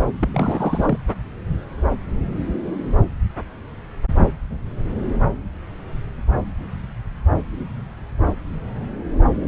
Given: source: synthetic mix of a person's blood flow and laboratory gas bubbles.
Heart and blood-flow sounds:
Doppler ultrasound of blood flow; subclavian vein
0.21-0.99 s: bubbles
From the record:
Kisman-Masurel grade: 212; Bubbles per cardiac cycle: several, 3 to 8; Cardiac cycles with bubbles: 1 to 10%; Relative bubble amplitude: moderate (0.250 to 0.450); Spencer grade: 1 (occasional bubble signal discernible with the cardiac motion signal, with majority of cardiac periods free of bubbles); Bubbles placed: anywhere in the cardiac cycle

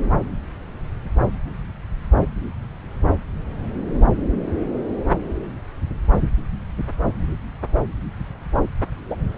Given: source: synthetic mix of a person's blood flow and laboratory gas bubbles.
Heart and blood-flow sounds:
Doppler ultrasound of blood flow; subclavian vein
9.09-9.16 s: bubbles
From the record:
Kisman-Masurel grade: 112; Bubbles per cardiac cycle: 1 to 2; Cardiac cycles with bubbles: 1 to 10%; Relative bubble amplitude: moderate (0.250 to 0.450); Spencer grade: 1 (occasional bubble signal discernible with the cardiac motion signal, with majority of cardiac periods free of bubbles); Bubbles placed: anywhere in the cardiac cycle

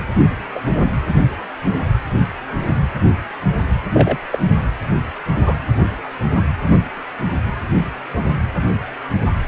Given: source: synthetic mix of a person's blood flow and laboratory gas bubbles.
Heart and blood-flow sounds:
Doppler ultrasound of blood flow; precordium
0.54-0.60 s: bubbles
3.92-4.17 s: bubbles
4.33-4.38 s: bubbles
5.44-5.55 s: bubbles
From the record:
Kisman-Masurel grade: 122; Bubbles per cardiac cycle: 1 to 2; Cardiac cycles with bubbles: 10 to 50%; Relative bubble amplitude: moderate (0.250 to 0.450); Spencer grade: 2 (many but less than half of the cardiac periods contain bubble signals, singularly or in groups); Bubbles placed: only in the low amplitude regions of the cardiac cycle

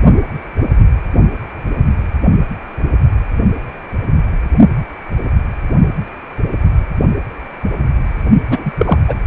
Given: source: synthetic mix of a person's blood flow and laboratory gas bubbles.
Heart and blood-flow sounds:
Doppler ultrasound of blood flow; precordium
8.49-8.72 s: bubbles
8.78-8.98 s: bubbles
9.08-9.17 s: bubbles
From the record:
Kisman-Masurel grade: 213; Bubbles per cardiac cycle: several, 3 to 8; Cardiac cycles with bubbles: 1 to 10%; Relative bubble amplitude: loud (0.450 to 0.775); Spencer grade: 1 (occasional bubble signal discernible with the cardiac motion signal, with majority of cardiac periods free of bubbles); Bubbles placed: only in the low amplitude regions of the cardiac cycle

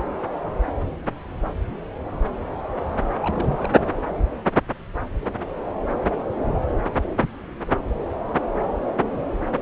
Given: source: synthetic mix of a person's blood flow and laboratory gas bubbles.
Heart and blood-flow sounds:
Doppler ultrasound of blood flow; subclavian vein
3.22-3.86 s: bubbles
3.96-4.05 s: bubbles
From the record:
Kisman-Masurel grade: 211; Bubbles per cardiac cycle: several, 3 to 8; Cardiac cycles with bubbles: 1 to 10%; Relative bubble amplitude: barely perceptible (0.100 to 0.250); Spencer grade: 1 (occasional bubble signal discernible with the cardiac motion signal, with majority of cardiac periods free of bubbles); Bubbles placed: anywhere in the cardiac cycle

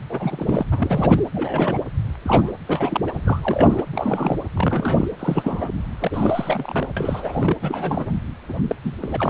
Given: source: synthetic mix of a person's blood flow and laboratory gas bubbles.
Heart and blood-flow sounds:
Doppler ultrasound of blood flow; precordium
0.09-0.66 s: bubbles
0.71-1.20 s: bubbles
1.34-1.79 s: bubbles
2.23-2.52 s: bubbles
2.67-3.83 s: bubbles
3.92-4.36 s: bubbles
4.55-5.07 s: bubbles
5.19-5.69 s: bubbles
5.99-6.87 s: bubbles
6.96-7.56 s: bubbles
7.62-8.16 s: bubbles
8.48-8.54 s: bubbles
8.68-8.76 s: bubbles
8.84-8.92 s: bubbles
9.00-9.30 s: bubbles
From the record:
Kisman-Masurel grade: 342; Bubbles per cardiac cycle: rolling drumbeat, 9 or more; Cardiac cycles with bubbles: 100%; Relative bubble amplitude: moderate (0.250 to 0.450); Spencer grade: 3 (all of the cardiac periods contain showers or single bubble signals, but not dominating or overriding the cardiac motion signals); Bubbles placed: anywhere in the cardiac cycle

